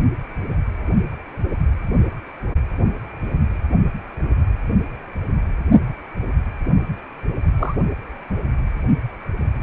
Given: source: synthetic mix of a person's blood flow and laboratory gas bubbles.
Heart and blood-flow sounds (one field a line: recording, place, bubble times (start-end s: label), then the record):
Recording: Doppler ultrasound of blood flow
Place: precordium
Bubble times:
7.59-7.75 s: bubbles
From the record:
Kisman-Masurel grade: 112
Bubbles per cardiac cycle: 1 to 2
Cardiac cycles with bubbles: 1 to 10%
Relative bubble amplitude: moderate (0.250 to 0.450)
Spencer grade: 1 (occasional bubble signal discernible with the cardiac motion signal, with majority of cardiac periods free of bubbles)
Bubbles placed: only in the low amplitude regions of the cardiac cycle